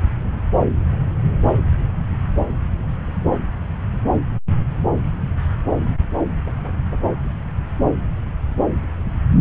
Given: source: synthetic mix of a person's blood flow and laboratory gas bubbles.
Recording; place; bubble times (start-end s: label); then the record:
Doppler ultrasound of blood flow; subclavian vein
no bubbles
From the record:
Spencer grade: 0 (complete lack of bubble signals)